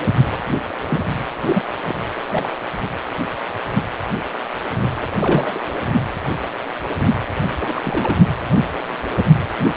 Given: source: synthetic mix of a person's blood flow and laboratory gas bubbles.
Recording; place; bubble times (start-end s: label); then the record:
Doppler ultrasound of blood flow; precordium
0.89-1.05 s: bubbles
1.46-1.62 s: bubbles
1.86-1.94 s: bubbles
2.31-2.50 s: bubbles
5.01-5.08 s: bubbles
5.20-5.60 s: bubbles
7.59-7.73 s: bubbles
7.75-8.19 s: bubbles
From the record:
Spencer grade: 3 (all of the cardiac periods contain showers or single bubble signals, but not dominating or overriding the cardiac motion signals); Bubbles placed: anywhere in the cardiac cycle